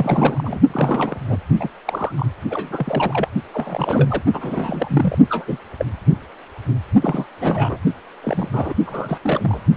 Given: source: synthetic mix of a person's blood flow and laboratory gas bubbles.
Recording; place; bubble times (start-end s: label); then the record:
Doppler ultrasound of blood flow; precordium
0.00-0.60 s: bubbles
0.67-1.38 s: bubbles
1.60-1.69 s: bubbles
1.85-2.12 s: bubbles
2.17-2.26 s: bubbles
2.50-3.28 s: bubbles
3.54-4.22 s: bubbles
4.33-5.16 s: bubbles
5.29-5.58 s: bubbles
5.78-5.85 s: bubbles
7.01-7.27 s: bubbles
7.40-7.78 s: bubbles
8.23-8.50 s: bubbles
8.53-8.73 s: bubbles
8.86-9.18 s: bubbles
9.22-9.60 s: bubbles
From the record:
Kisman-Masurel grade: 242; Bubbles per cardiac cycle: several, 3 to 8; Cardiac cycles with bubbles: 100%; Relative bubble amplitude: moderate (0.250 to 0.450); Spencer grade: 3 (all of the cardiac periods contain showers or single bubble signals, but not dominating or overriding the cardiac motion signals); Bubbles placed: only in the low amplitude regions of the cardiac cycle